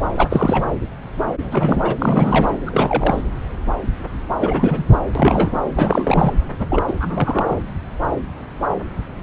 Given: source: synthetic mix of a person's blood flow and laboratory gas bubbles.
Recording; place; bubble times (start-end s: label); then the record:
Doppler ultrasound of blood flow; subclavian vein
0.14-0.66 s: bubbles
1.42-1.95 s: bubbles
1.98-2.55 s: bubbles
2.66-3.23 s: bubbles
4.40-4.83 s: bubbles
4.92-4.97 s: bubbles
5.15-5.61 s: bubbles
5.75-6.33 s: bubbles
6.59-6.66 s: bubbles
6.70-6.83 s: bubbles
6.87-6.92 s: bubbles
7.00-7.62 s: bubbles
From the record:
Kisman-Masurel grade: 332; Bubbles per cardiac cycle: rolling drumbeat, 9 or more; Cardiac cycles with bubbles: 50 to 99%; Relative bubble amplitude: moderate (0.250 to 0.450); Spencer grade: 3 (all of the cardiac periods contain showers or single bubble signals, but not dominating or overriding the cardiac motion signals); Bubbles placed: anywhere in the cardiac cycle